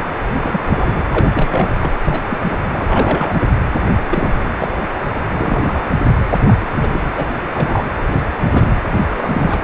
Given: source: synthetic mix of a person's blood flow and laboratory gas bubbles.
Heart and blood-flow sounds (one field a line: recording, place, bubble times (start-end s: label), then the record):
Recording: Doppler ultrasound of blood flow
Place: precordium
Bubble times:
0.00-0.05 s: bubbles
0.42-0.60 s: bubbles
0.65-1.00 s: bubbles
1.11-1.30 s: bubbles
1.33-1.71 s: bubbles
1.81-1.93 s: bubbles
2.04-2.22 s: bubbles
2.30-2.58 s: bubbles
2.73-2.86 s: bubbles
2.88-3.48 s: bubbles
4.09-4.79 s: bubbles
5.34-5.85 s: bubbles
6.29-6.37 s: bubbles
6.47-6.56 s: bubbles
6.60-6.69 s: bubbles
6.80-6.88 s: bubbles
6.91-7.00 s: bubbles
7.15-7.26 s: bubbles
7.52-7.86 s: bubbles
8.12-8.26 s: bubbles
8.43-8.71 s: bubbles
9.16-9.62 s: bubbles
From the record:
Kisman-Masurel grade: 242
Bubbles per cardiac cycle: several, 3 to 8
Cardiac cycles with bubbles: 100%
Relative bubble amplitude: moderate (0.250 to 0.450)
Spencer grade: 3 (all of the cardiac periods contain showers or single bubble signals, but not dominating or overriding the cardiac motion signals)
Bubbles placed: anywhere in the cardiac cycle